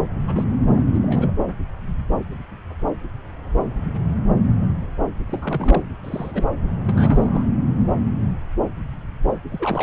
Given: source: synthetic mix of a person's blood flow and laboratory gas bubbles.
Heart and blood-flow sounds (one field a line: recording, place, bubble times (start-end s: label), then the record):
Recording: Doppler ultrasound of blood flow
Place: subclavian vein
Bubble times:
0.27-0.44 s: bubbles
0.77-0.82 s: bubbles
0.85-1.32 s: bubbles
5.27-5.85 s: bubbles
6.03-6.49 s: bubbles
6.86-7.44 s: bubbles
7.67-7.87 s: bubbles
9.49-9.83 s: bubbles
From the record:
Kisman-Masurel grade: 221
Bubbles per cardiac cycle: several, 3 to 8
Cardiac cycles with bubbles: 10 to 50%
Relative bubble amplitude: barely perceptible (0.100 to 0.250)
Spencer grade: 2 (many but less than half of the cardiac periods contain bubble signals, singularly or in groups)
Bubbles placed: anywhere in the cardiac cycle